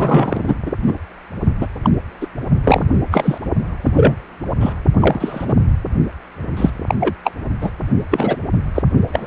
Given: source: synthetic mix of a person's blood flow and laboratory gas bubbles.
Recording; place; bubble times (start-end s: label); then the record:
Doppler ultrasound of blood flow; precordium
0.00-0.55 s: bubbles
0.66-0.72 s: bubbles
0.86-0.98 s: bubbles
1.60-1.67 s: bubbles
1.83-1.90 s: bubbles
2.21-2.28 s: bubbles
2.63-2.83 s: bubbles
3.11-3.38 s: bubbles
3.83-4.16 s: bubbles
4.60-4.73 s: bubbles
5.00-5.46 s: bubbles
5.48-5.55 s: bubbles
6.57-6.70 s: bubbles
6.87-6.95 s: bubbles
7.00-7.13 s: bubbles
7.24-7.32 s: bubbles
7.62-7.72 s: bubbles
8.11-8.37 s: bubbles
8.75-8.83 s: bubbles
9.12-9.27 s: bubbles
From the record:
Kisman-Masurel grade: 243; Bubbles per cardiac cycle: several, 3 to 8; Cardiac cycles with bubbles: 100%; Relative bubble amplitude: loud (0.450 to 0.775); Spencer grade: 3 (all of the cardiac periods contain showers or single bubble signals, but not dominating or overriding the cardiac motion signals); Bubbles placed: only in the low amplitude regions of the cardiac cycle